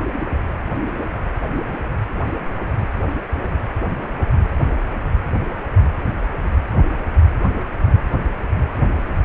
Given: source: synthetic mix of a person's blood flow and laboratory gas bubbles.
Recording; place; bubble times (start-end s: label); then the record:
Doppler ultrasound of blood flow; precordium
0.12-0.25 s: bubbles
From the record:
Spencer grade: 1 (occasional bubble signal discernible with the cardiac motion signal, with majority of cardiac periods free of bubbles); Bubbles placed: anywhere in the cardiac cycle